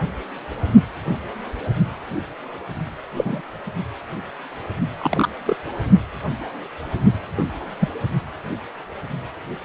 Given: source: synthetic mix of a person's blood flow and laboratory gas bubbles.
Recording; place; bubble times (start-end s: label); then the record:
Doppler ultrasound of blood flow; precordium
3.16-3.41 s: bubbles
4.98-5.29 s: bubbles
5.47-5.56 s: bubbles
7.37-7.43 s: bubbles
7.79-7.88 s: bubbles
From the record:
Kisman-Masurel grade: 122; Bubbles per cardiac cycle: 1 to 2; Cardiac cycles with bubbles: 10 to 50%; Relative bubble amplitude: moderate (0.250 to 0.450); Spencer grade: 2 (many but less than half of the cardiac periods contain bubble signals, singularly or in groups); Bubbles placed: only in the low amplitude regions of the cardiac cycle